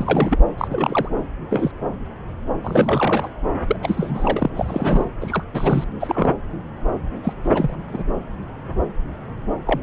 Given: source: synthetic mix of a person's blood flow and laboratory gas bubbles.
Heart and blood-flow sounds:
Doppler ultrasound of blood flow; subclavian vein
0.00-0.39 s: bubbles
0.57-0.67 s: bubbles
0.70-1.08 s: bubbles
1.50-1.71 s: bubbles
2.63-3.28 s: bubbles
3.67-3.76 s: bubbles
3.82-4.50 s: bubbles
4.54-5.04 s: bubbles
5.21-5.43 s: bubbles
5.53-5.84 s: bubbles
6.00-6.32 s: bubbles
7.23-7.33 s: bubbles
7.44-7.50 s: bubbles
7.54-7.76 s: bubbles
7.93-8.03 s: bubbles
9.66-9.81 s: bubbles
From the record:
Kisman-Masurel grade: 232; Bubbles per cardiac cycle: several, 3 to 8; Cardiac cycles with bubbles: 50 to 99%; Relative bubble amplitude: moderate (0.250 to 0.450); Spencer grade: 3 (all of the cardiac periods contain showers or single bubble signals, but not dominating or overriding the cardiac motion signals); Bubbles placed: anywhere in the cardiac cycle

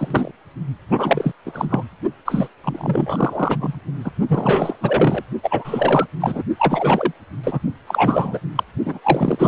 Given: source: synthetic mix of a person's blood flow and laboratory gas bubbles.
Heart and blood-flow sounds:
Doppler ultrasound of blood flow; precordium
0.00-0.31 s: bubbles
0.90-1.31 s: bubbles
1.45-1.83 s: bubbles
2.25-2.48 s: bubbles
2.63-3.79 s: bubbles
4.04-4.12 s: bubbles
4.28-4.76 s: bubbles
4.80-5.23 s: bubbles
5.43-6.06 s: bubbles
6.20-6.43 s: bubbles
6.58-7.12 s: bubbles
7.43-7.60 s: bubbles
7.87-8.39 s: bubbles
8.55-8.63 s: bubbles
8.85-8.99 s: bubbles
9.03-9.48 s: bubbles
From the record:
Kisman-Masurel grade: 343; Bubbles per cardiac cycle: rolling drumbeat, 9 or more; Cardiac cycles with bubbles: 100%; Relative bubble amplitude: loud (0.450 to 0.775); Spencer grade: 3 (all of the cardiac periods contain showers or single bubble signals, but not dominating or overriding the cardiac motion signals); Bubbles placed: only in the low amplitude regions of the cardiac cycle

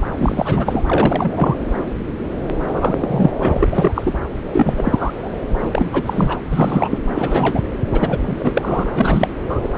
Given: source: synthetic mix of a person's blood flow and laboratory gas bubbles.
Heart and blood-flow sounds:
Doppler ultrasound of blood flow; subclavian vein
0.17-0.82 s: bubbles
0.86-1.56 s: bubbles
2.70-3.30 s: bubbles
3.40-3.69 s: bubbles
3.71-3.92 s: bubbles
3.95-4.13 s: bubbles
4.53-5.29 s: bubbles
5.61-5.89 s: bubbles
5.92-6.03 s: bubbles
6.06-6.38 s: bubbles
6.51-6.99 s: bubbles
7.15-7.61 s: bubbles
7.92-8.88 s: bubbles
8.94-9.29 s: bubbles
9.49-9.60 s: bubbles
9.62-9.69 s: bubbles
From the record:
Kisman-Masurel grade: 333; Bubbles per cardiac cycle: rolling drumbeat, 9 or more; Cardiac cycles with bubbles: 50 to 99%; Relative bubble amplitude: loud (0.450 to 0.775); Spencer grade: 3 (all of the cardiac periods contain showers or single bubble signals, but not dominating or overriding the cardiac motion signals); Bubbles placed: anywhere in the cardiac cycle

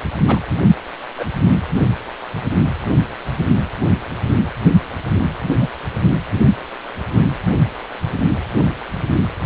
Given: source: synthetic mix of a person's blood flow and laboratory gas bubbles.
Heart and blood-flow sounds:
Doppler ultrasound of blood flow; precordium
0.27-0.39 s: bubbles
1.18-1.24 s: bubbles
5.60-5.68 s: bubbles
From the record:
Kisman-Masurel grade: 122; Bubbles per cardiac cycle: 1 to 2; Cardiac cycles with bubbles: 10 to 50%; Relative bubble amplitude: moderate (0.250 to 0.450); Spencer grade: 2 (many but less than half of the cardiac periods contain bubble signals, singularly or in groups); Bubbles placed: anywhere in the cardiac cycle

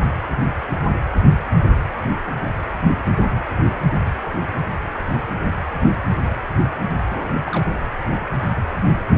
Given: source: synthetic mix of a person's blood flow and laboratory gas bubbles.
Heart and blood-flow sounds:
Doppler ultrasound of blood flow; precordium
7.07-7.33 s: bubbles
7.46-7.64 s: bubbles
From the record:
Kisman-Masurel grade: 211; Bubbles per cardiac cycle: several, 3 to 8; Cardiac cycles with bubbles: 1 to 10%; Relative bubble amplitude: barely perceptible (0.100 to 0.250); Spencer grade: 1 (occasional bubble signal discernible with the cardiac motion signal, with majority of cardiac periods free of bubbles); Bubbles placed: anywhere in the cardiac cycle

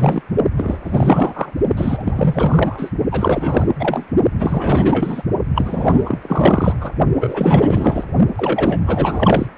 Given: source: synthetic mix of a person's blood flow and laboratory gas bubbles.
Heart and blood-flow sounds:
Doppler ultrasound of blood flow; precordium
0.00-0.22 s: bubbles
0.56-0.79 s: bubbles
0.83-1.51 s: bubbles
1.77-2.90 s: bubbles
3.11-3.73 s: bubbles
3.79-4.06 s: bubbles
4.39-5.22 s: bubbles
5.55-6.19 s: bubbles
6.22-6.74 s: bubbles
6.80-6.92 s: bubbles
7.20-8.04 s: bubbles
8.36-8.80 s: bubbles
8.87-9.48 s: bubbles
From the record:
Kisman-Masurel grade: 444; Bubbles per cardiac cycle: continuous sound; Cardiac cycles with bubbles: 100%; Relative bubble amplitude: maximal (0.775 to 0.999); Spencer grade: 4 (maximum detectable bubble signal sounding continuously throughout systole and diastole of every cardiac period, and overriding the amplitude of the normal cardiac signals); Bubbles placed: only in the low amplitude regions of the cardiac cycle

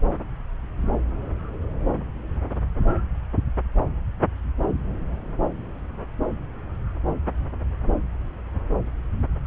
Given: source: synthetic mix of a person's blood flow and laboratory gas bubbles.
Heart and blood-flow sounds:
Doppler ultrasound of blood flow; subclavian vein
no bubbles
From the record:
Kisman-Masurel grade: 000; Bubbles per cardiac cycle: 0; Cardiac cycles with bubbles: 0%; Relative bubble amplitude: no bubbles discernible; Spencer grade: 0 (complete lack of bubble signals)

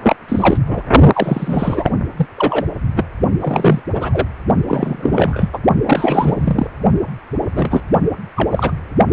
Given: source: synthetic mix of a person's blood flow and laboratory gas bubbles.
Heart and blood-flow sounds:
Doppler ultrasound of blood flow; precordium
0.02-0.16 s: bubbles
0.28-0.57 s: bubbles
0.66-0.88 s: bubbles
1.13-1.90 s: bubbles
2.17-2.27 s: bubbles
2.37-2.66 s: bubbles
2.96-3.04 s: bubbles
3.40-3.82 s: bubbles
3.94-4.27 s: bubbles
4.67-5.49 s: bubbles
5.53-5.58 s: bubbles
5.85-6.67 s: bubbles
7.55-7.81 s: bubbles
8.36-8.71 s: bubbles
From the record:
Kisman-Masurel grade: 243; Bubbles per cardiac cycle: several, 3 to 8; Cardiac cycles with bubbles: 100%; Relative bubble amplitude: loud (0.450 to 0.775); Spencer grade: 3 (all of the cardiac periods contain showers or single bubble signals, but not dominating or overriding the cardiac motion signals); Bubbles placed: only in the low amplitude regions of the cardiac cycle

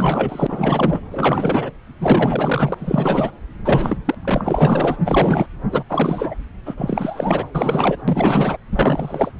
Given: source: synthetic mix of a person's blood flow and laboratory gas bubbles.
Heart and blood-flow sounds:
Doppler ultrasound of blood flow; subclavian vein
0.00-1.01 s: bubbles
1.10-1.70 s: bubbles
2.00-2.75 s: bubbles
2.78-3.31 s: bubbles
3.64-3.97 s: bubbles
4.04-4.14 s: bubbles
4.21-4.97 s: bubbles
5.04-5.46 s: bubbles
5.71-5.83 s: bubbles
5.89-6.35 s: bubbles
6.65-7.46 s: bubbles
7.54-7.96 s: bubbles
8.07-8.57 s: bubbles
8.71-9.31 s: bubbles
From the record:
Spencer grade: 4 (maximum detectable bubble signal sounding continuously throughout systole and diastole of every cardiac period, and overriding the amplitude of the normal cardiac signals); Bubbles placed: anywhere in the cardiac cycle

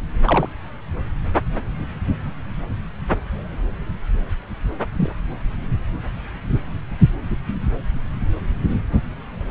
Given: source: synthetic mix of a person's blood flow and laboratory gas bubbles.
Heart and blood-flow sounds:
Doppler ultrasound of blood flow; subclavian vein
0.25-0.48 s: bubbles
4.94-5.11 s: bubbles
From the record:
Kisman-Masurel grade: 122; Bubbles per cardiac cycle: 1 to 2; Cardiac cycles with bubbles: 10 to 50%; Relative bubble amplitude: moderate (0.250 to 0.450); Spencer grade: 2 (many but less than half of the cardiac periods contain bubble signals, singularly or in groups); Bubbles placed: anywhere in the cardiac cycle

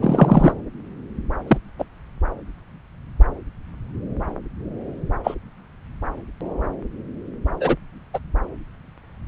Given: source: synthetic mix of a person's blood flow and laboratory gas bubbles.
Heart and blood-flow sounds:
Doppler ultrasound of blood flow; subclavian vein
0.01-0.53 s: bubbles
1.48-1.57 s: bubbles
1.78-1.85 s: bubbles
5.23-5.34 s: bubbles
7.60-7.76 s: bubbles
8.13-8.19 s: bubbles
From the record:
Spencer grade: 2 (many but less than half of the cardiac periods contain bubble signals, singularly or in groups); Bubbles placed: anywhere in the cardiac cycle

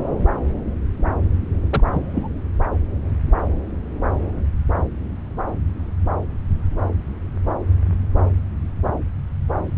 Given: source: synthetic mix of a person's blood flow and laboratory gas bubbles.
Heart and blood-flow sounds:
Doppler ultrasound of blood flow; subclavian vein
1.70-1.83 s: bubbles
1.91-2.28 s: bubbles
From the record:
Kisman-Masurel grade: 112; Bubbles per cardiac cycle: 1 to 2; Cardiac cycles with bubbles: 1 to 10%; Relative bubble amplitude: moderate (0.250 to 0.450); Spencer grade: 1 (occasional bubble signal discernible with the cardiac motion signal, with majority of cardiac periods free of bubbles); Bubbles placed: anywhere in the cardiac cycle

